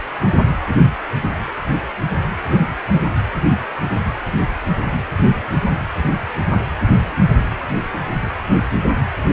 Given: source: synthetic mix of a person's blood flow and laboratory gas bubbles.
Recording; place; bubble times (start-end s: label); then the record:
Doppler ultrasound of blood flow; precordium
2.48-2.61 s: bubbles
2.95-3.00 s: bubbles
From the record:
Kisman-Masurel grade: 112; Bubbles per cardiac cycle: 1 to 2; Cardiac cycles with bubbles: 1 to 10%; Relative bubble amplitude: moderate (0.250 to 0.450); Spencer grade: 1 (occasional bubble signal discernible with the cardiac motion signal, with majority of cardiac periods free of bubbles); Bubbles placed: anywhere in the cardiac cycle